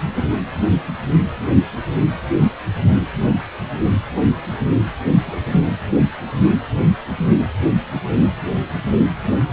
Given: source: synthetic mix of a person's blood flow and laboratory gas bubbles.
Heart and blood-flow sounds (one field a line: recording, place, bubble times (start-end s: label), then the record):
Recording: Doppler ultrasound of blood flow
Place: precordium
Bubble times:
5.26-5.36 s: bubbles
From the record:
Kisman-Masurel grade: 111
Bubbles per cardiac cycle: 1 to 2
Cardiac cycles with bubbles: 1 to 10%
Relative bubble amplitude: barely perceptible (0.100 to 0.250)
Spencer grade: 1 (occasional bubble signal discernible with the cardiac motion signal, with majority of cardiac periods free of bubbles)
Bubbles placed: anywhere in the cardiac cycle